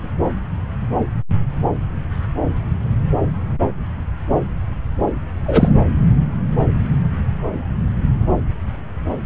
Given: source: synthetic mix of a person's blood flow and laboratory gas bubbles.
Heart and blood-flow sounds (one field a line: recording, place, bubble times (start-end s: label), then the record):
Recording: Doppler ultrasound of blood flow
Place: subclavian vein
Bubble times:
5.44-5.74 s: bubbles
From the record:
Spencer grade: 2 (many but less than half of the cardiac periods contain bubble signals, singularly or in groups)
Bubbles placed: anywhere in the cardiac cycle